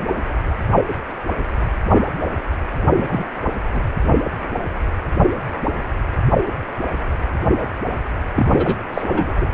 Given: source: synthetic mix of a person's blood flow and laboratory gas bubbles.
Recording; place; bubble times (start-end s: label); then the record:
Doppler ultrasound of blood flow; precordium
2.96-3.25 s: bubbles
3.73-3.81 s: bubbles
8.36-8.77 s: bubbles
8.94-9.47 s: bubbles
From the record:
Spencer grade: 2 (many but less than half of the cardiac periods contain bubble signals, singularly or in groups); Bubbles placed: anywhere in the cardiac cycle